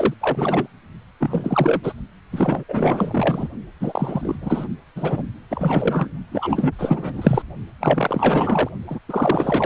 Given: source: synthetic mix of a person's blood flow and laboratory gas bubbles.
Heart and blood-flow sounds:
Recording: Doppler ultrasound of blood flow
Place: precordium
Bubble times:
0.00-0.14 s: bubbles
0.21-0.67 s: bubbles
1.19-1.93 s: bubbles
2.31-2.64 s: bubbles
2.69-3.48 s: bubbles
3.80-4.38 s: bubbles
4.41-4.67 s: bubbles
4.96-5.24 s: bubbles
5.50-6.08 s: bubbles
6.32-6.72 s: bubbles
6.78-7.42 s: bubbles
7.80-8.69 s: bubbles
8.87-8.99 s: bubbles
9.09-9.66 s: bubbles
From the record:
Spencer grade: 4 (maximum detectable bubble signal sounding continuously throughout systole and diastole of every cardiac period, and overriding the amplitude of the normal cardiac signals)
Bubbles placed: only in the low amplitude regions of the cardiac cycle

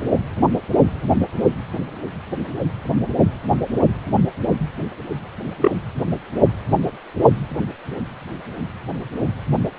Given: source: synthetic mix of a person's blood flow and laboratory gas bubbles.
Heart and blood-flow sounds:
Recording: Doppler ultrasound of blood flow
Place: precordium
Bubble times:
5.61-5.71 s: bubbles
From the record:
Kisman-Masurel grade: 113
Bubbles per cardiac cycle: 1 to 2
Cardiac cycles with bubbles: 1 to 10%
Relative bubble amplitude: loud (0.450 to 0.775)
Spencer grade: 1 (occasional bubble signal discernible with the cardiac motion signal, with majority of cardiac periods free of bubbles)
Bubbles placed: only in the low amplitude regions of the cardiac cycle

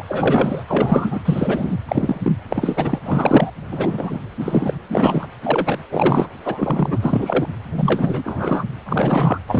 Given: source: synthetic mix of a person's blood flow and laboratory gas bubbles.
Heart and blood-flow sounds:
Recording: Doppler ultrasound of blood flow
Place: precordium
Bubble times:
0.00-0.02 s: bubbles
0.08-0.63 s: bubbles
0.68-1.21 s: bubbles
1.25-1.77 s: bubbles
1.88-2.33 s: bubbles
2.49-2.99 s: bubbles
3.05-3.50 s: bubbles
3.71-4.19 s: bubbles
4.40-4.77 s: bubbles
4.91-5.28 s: bubbles
5.43-5.79 s: bubbles
5.91-6.28 s: bubbles
6.45-6.99 s: bubbles
7.01-7.46 s: bubbles
7.76-8.64 s: bubbles
8.86-9.38 s: bubbles
9.47-9.60 s: bubbles
From the record:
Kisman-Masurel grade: 243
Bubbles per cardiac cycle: several, 3 to 8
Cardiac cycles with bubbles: 100%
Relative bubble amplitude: loud (0.450 to 0.775)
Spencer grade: 3 (all of the cardiac periods contain showers or single bubble signals, but not dominating or overriding the cardiac motion signals)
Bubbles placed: anywhere in the cardiac cycle

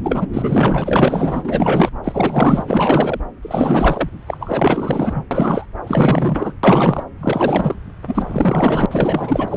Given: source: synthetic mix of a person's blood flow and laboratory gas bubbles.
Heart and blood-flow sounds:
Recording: Doppler ultrasound of blood flow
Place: subclavian vein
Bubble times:
0.03-0.26 s: bubbles
0.33-1.89 s: bubbles
2.04-2.63 s: bubbles
2.68-3.20 s: bubbles
3.42-4.09 s: bubbles
4.26-5.25 s: bubbles
5.31-5.67 s: bubbles
5.84-6.54 s: bubbles
6.63-7.04 s: bubbles
7.18-7.75 s: bubbles
8.07-8.86 s: bubbles
8.91-9.57 s: bubbles
From the record:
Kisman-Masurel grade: 444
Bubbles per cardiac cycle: continuous sound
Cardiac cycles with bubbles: 100%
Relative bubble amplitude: maximal (0.775 to 0.999)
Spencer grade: 4 (maximum detectable bubble signal sounding continuously throughout systole and diastole of every cardiac period, and overriding the amplitude of the normal cardiac signals)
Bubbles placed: anywhere in the cardiac cycle

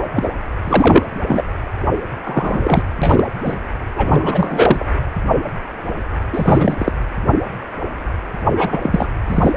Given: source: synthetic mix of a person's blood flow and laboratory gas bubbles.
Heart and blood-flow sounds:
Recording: Doppler ultrasound of blood flow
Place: precordium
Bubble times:
0.00-0.29 s: bubbles
0.65-1.06 s: bubbles
1.25-1.44 s: bubbles
2.25-2.82 s: bubbles
3.01-3.28 s: bubbles
3.44-3.56 s: bubbles
3.95-4.86 s: bubbles
6.33-6.75 s: bubbles
6.78-6.92 s: bubbles
8.56-9.07 s: bubbles
9.28-9.56 s: bubbles
From the record:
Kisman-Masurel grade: 233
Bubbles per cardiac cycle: several, 3 to 8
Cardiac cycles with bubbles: 50 to 99%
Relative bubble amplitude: loud (0.450 to 0.775)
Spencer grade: 3 (all of the cardiac periods contain showers or single bubble signals, but not dominating or overriding the cardiac motion signals)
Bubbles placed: anywhere in the cardiac cycle

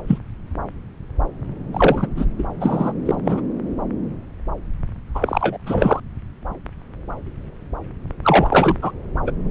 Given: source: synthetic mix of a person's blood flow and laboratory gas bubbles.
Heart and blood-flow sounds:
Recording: Doppler ultrasound of blood flow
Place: subclavian vein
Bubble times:
0.08-0.18 s: bubbles
1.73-2.08 s: bubbles
2.17-2.25 s: bubbles
2.38-2.44 s: bubbles
2.60-2.93 s: bubbles
3.05-3.15 s: bubbles
3.25-3.42 s: bubbles
5.15-5.57 s: bubbles
5.66-6.00 s: bubbles
8.22-8.76 s: bubbles
8.82-8.91 s: bubbles
9.26-9.31 s: bubbles
From the record:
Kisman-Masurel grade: 233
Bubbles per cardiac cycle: several, 3 to 8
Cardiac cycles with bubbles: 50 to 99%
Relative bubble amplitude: loud (0.450 to 0.775)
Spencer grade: 3 (all of the cardiac periods contain showers or single bubble signals, but not dominating or overriding the cardiac motion signals)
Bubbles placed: anywhere in the cardiac cycle

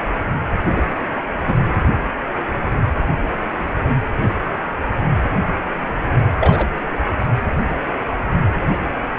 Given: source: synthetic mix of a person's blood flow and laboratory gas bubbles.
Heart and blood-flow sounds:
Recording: Doppler ultrasound of blood flow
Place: precordium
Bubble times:
0.75-0.83 s: bubbles
1.46-1.57 s: bubbles
6.41-6.67 s: bubbles
7.19-7.26 s: bubbles
From the record:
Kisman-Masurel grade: 123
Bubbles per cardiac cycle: 1 to 2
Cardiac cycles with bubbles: 10 to 50%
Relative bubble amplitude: loud (0.450 to 0.775)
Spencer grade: 2 (many but less than half of the cardiac periods contain bubble signals, singularly or in groups)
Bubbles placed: anywhere in the cardiac cycle

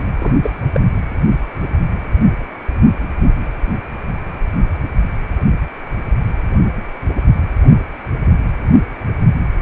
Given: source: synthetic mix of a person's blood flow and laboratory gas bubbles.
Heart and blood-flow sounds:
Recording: Doppler ultrasound of blood flow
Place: precordium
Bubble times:
0.19-0.70 s: bubbles
0.73-0.81 s: bubbles
From the record:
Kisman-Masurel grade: 212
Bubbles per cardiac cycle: several, 3 to 8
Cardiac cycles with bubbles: 1 to 10%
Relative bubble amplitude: moderate (0.250 to 0.450)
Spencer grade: 1 (occasional bubble signal discernible with the cardiac motion signal, with majority of cardiac periods free of bubbles)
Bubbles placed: anywhere in the cardiac cycle

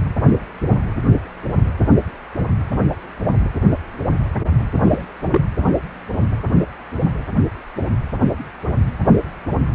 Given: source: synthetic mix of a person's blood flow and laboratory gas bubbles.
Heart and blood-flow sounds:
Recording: Doppler ultrasound of blood flow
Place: precordium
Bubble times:
4.84-5.01 s: bubbles
5.31-5.42 s: bubbles
From the record:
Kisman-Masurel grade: 112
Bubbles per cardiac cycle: 1 to 2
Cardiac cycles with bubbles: 1 to 10%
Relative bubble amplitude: moderate (0.250 to 0.450)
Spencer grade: 1 (occasional bubble signal discernible with the cardiac motion signal, with majority of cardiac periods free of bubbles)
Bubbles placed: anywhere in the cardiac cycle

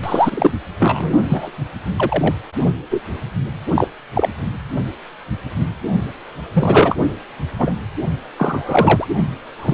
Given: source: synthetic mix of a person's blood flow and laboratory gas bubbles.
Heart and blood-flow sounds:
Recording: Doppler ultrasound of blood flow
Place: precordium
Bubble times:
0.03-0.51 s: bubbles
0.79-1.13 s: bubbles
1.29-1.50 s: bubbles
1.96-2.35 s: bubbles
2.91-3.01 s: bubbles
3.74-3.88 s: bubbles
4.13-4.29 s: bubbles
6.54-6.96 s: bubbles
7.58-7.73 s: bubbles
8.38-9.05 s: bubbles
9.59-9.74 s: bubbles
From the record:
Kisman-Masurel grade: 233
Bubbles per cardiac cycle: several, 3 to 8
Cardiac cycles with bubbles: 50 to 99%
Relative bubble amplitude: loud (0.450 to 0.775)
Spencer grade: 3 (all of the cardiac periods contain showers or single bubble signals, but not dominating or overriding the cardiac motion signals)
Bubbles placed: only in the low amplitude regions of the cardiac cycle

